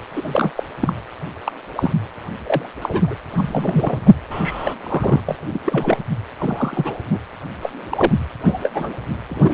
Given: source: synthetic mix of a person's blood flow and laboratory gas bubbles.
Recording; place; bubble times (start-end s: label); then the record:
Doppler ultrasound of blood flow; precordium
0.13-0.51 s: bubbles
0.55-0.64 s: bubbles
0.80-0.94 s: bubbles
1.46-1.52 s: bubbles
1.77-1.93 s: bubbles
2.43-2.70 s: bubbles
2.81-3.15 s: bubbles
3.33-4.11 s: bubbles
4.30-4.74 s: bubbles
4.82-5.21 s: bubbles
5.29-5.36 s: bubbles
5.50-5.61 s: bubbles
5.65-5.97 s: bubbles
6.38-6.95 s: bubbles
7.07-7.18 s: bubbles
7.62-7.73 s: bubbles
7.90-8.13 s: bubbles
8.45-8.70 s: bubbles
8.75-8.94 s: bubbles
9.29-9.54 s: bubbles
From the record:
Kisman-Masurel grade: 242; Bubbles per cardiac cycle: several, 3 to 8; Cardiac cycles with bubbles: 100%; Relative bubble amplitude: moderate (0.250 to 0.450); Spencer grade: 3 (all of the cardiac periods contain showers or single bubble signals, but not dominating or overriding the cardiac motion signals); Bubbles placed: anywhere in the cardiac cycle